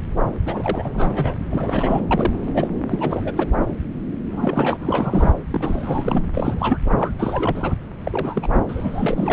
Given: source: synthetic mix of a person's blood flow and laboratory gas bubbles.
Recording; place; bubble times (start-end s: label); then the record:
Doppler ultrasound of blood flow; subclavian vein
0.46-1.35 s: bubbles
1.50-2.02 s: bubbles
2.10-2.70 s: bubbles
2.89-3.33 s: bubbles
3.37-3.47 s: bubbles
4.29-5.34 s: bubbles
5.51-6.23 s: bubbles
6.34-6.79 s: bubbles
6.97-7.12 s: bubbles
7.18-7.75 s: bubbles
8.04-8.47 s: bubbles
8.53-8.60 s: bubbles
8.68-9.33 s: bubbles
From the record:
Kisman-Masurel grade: 332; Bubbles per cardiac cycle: rolling drumbeat, 9 or more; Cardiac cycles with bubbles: 50 to 99%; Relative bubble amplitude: moderate (0.250 to 0.450); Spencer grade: 3 (all of the cardiac periods contain showers or single bubble signals, but not dominating or overriding the cardiac motion signals); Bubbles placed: anywhere in the cardiac cycle